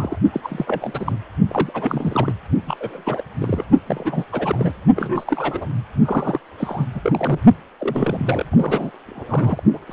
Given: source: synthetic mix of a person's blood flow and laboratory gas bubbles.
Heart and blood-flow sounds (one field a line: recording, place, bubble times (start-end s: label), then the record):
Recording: Doppler ultrasound of blood flow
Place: precordium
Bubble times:
0.00-0.18 s: bubbles
0.33-0.40 s: bubbles
0.43-1.17 s: bubbles
1.49-2.33 s: bubbles
2.67-2.77 s: bubbles
2.80-3.23 s: bubbles
3.40-3.65 s: bubbles
3.86-4.25 s: bubbles
4.32-4.73 s: bubbles
4.96-5.70 s: bubbles
6.05-6.40 s: bubbles
6.58-6.86 s: bubbles
6.95-7.00 s: bubbles
7.03-7.40 s: bubbles
7.79-8.46 s: bubbles
8.51-8.91 s: bubbles
9.07-9.63 s: bubbles
9.73-9.79 s: bubbles
9.88-9.93 s: bubbles
From the record:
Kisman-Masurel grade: 342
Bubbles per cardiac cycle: rolling drumbeat, 9 or more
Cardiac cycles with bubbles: 100%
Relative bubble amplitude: moderate (0.250 to 0.450)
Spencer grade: 3 (all of the cardiac periods contain showers or single bubble signals, but not dominating or overriding the cardiac motion signals)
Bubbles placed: only in the low amplitude regions of the cardiac cycle